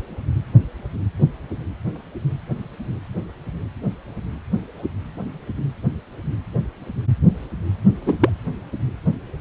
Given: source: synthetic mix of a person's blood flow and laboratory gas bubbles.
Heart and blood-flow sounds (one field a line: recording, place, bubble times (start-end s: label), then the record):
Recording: Doppler ultrasound of blood flow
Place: precordium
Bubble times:
8.06-8.29 s: bubbles
From the record:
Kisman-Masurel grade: 113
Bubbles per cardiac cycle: 1 to 2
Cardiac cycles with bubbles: 1 to 10%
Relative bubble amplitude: loud (0.450 to 0.775)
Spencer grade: 1 (occasional bubble signal discernible with the cardiac motion signal, with majority of cardiac periods free of bubbles)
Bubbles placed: anywhere in the cardiac cycle